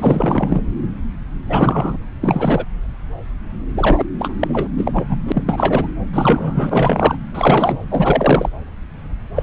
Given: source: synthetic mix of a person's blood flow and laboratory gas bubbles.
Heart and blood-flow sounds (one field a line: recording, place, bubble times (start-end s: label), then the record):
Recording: Doppler ultrasound of blood flow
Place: subclavian vein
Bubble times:
0.00-0.61 s: bubbles
1.47-1.98 s: bubbles
2.21-2.66 s: bubbles
3.74-4.06 s: bubbles
4.18-4.33 s: bubbles
4.41-4.68 s: bubbles
4.74-5.05 s: bubbles
5.08-5.20 s: bubbles
5.25-5.44 s: bubbles
5.46-5.87 s: bubbles
6.13-7.17 s: bubbles
7.34-7.78 s: bubbles
7.90-8.49 s: bubbles
9.35-9.43 s: bubbles
From the record:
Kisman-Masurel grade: 333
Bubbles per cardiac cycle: rolling drumbeat, 9 or more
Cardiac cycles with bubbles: 50 to 99%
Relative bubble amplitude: loud (0.450 to 0.775)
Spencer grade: 3 (all of the cardiac periods contain showers or single bubble signals, but not dominating or overriding the cardiac motion signals)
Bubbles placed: anywhere in the cardiac cycle